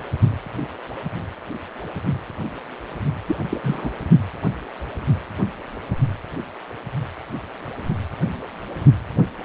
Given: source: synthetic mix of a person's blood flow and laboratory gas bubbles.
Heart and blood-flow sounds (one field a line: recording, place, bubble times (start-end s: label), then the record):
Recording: Doppler ultrasound of blood flow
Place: precordium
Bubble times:
3.26-3.36 s: bubbles
3.49-3.59 s: bubbles
3.63-3.92 s: bubbles
From the record:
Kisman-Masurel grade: 212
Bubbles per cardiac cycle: several, 3 to 8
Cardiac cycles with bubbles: 1 to 10%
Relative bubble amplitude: moderate (0.250 to 0.450)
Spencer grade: 1 (occasional bubble signal discernible with the cardiac motion signal, with majority of cardiac periods free of bubbles)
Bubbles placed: only in the low amplitude regions of the cardiac cycle